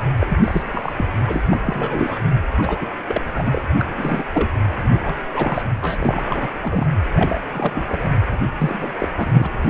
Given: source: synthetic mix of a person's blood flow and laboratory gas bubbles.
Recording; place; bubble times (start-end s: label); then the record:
Doppler ultrasound of blood flow; precordium
0.19-0.38 s: bubbles
0.42-0.62 s: bubbles
0.73-0.92 s: bubbles
0.96-1.06 s: bubbles
1.26-1.45 s: bubbles
1.49-1.60 s: bubbles
1.65-2.19 s: bubbles
2.58-2.87 s: bubbles
3.08-3.22 s: bubbles
3.34-3.62 s: bubbles
3.79-3.85 s: bubbles
3.96-4.24 s: bubbles
4.33-4.50 s: bubbles
4.83-4.99 s: bubbles
5.05-5.15 s: bubbles
5.33-5.62 s: bubbles
5.81-6.23 s: bubbles
6.28-6.47 s: bubbles
6.61-6.86 s: bubbles
7.16-7.42 s: bubbles
7.53-8.12 s: bubbles
8.31-8.37 s: bubbles
8.58-9.08 s: bubbles
9.16-9.50 s: bubbles
From the record:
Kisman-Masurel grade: 332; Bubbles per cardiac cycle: rolling drumbeat, 9 or more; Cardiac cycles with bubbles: 50 to 99%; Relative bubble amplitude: moderate (0.250 to 0.450); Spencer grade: 3 (all of the cardiac periods contain showers or single bubble signals, but not dominating or overriding the cardiac motion signals); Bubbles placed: anywhere in the cardiac cycle